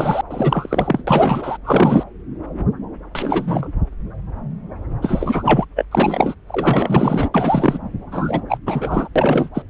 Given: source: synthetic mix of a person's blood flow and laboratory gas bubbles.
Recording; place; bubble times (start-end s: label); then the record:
Doppler ultrasound of blood flow; subclavian vein
0.00-0.21 s: bubbles
0.30-1.02 s: bubbles
1.07-1.57 s: bubbles
1.64-2.04 s: bubbles
3.15-3.73 s: bubbles
5.02-5.65 s: bubbles
5.76-5.85 s: bubbles
5.91-6.34 s: bubbles
6.49-7.29 s: bubbles
7.34-7.78 s: bubbles
8.11-8.41 s: bubbles
8.48-8.57 s: bubbles
8.66-9.08 s: bubbles
9.15-9.49 s: bubbles
9.54-9.62 s: bubbles
From the record:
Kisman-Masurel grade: 333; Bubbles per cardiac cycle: rolling drumbeat, 9 or more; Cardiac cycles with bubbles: 50 to 99%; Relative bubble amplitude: loud (0.450 to 0.775); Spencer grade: 3 (all of the cardiac periods contain showers or single bubble signals, but not dominating or overriding the cardiac motion signals); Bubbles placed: anywhere in the cardiac cycle